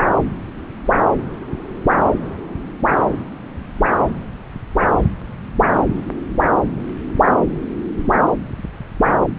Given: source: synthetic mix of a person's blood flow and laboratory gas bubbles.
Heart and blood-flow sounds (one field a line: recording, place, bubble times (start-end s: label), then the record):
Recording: Doppler ultrasound of blood flow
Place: subclavian vein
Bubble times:
3.06-3.16 s: bubbles
From the record:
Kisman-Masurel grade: 122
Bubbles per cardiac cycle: 1 to 2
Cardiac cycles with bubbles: 10 to 50%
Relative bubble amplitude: moderate (0.250 to 0.450)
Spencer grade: 2 (many but less than half of the cardiac periods contain bubble signals, singularly or in groups)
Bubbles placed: anywhere in the cardiac cycle